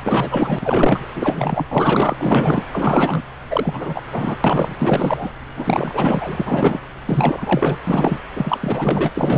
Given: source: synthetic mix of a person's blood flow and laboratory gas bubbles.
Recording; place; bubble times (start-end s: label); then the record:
Doppler ultrasound of blood flow; subclavian vein
0.03-1.08 s: bubbles
1.16-1.66 s: bubbles
1.71-2.65 s: bubbles
2.72-3.22 s: bubbles
3.50-4.02 s: bubbles
4.10-4.37 s: bubbles
4.44-4.75 s: bubbles
4.79-5.31 s: bubbles
5.56-6.79 s: bubbles
7.05-7.78 s: bubbles
7.87-8.19 s: bubbles
8.36-9.10 s: bubbles
9.14-9.38 s: bubbles
From the record:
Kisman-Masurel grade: 444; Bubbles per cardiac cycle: continuous sound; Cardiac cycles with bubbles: 100%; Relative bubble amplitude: maximal (0.775 to 0.999); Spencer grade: 4 (maximum detectable bubble signal sounding continuously throughout systole and diastole of every cardiac period, and overriding the amplitude of the normal cardiac signals); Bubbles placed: anywhere in the cardiac cycle